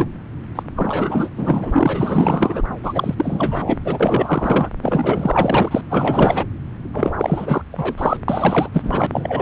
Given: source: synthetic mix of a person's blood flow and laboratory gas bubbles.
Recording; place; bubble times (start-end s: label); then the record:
Doppler ultrasound of blood flow; subclavian vein
0.00-0.08 s: bubbles
0.55-0.63 s: bubbles
0.75-1.29 s: bubbles
1.36-2.62 s: bubbles
2.83-3.77 s: bubbles
3.85-4.70 s: bubbles
4.82-5.82 s: bubbles
5.90-6.46 s: bubbles
6.93-7.14 s: bubbles
7.18-7.62 s: bubbles
7.72-7.95 s: bubbles
7.98-8.17 s: bubbles
8.28-8.68 s: bubbles
8.72-9.06 s: bubbles
9.12-9.42 s: bubbles
From the record:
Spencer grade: 4 (maximum detectable bubble signal sounding continuously throughout systole and diastole of every cardiac period, and overriding the amplitude of the normal cardiac signals); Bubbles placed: anywhere in the cardiac cycle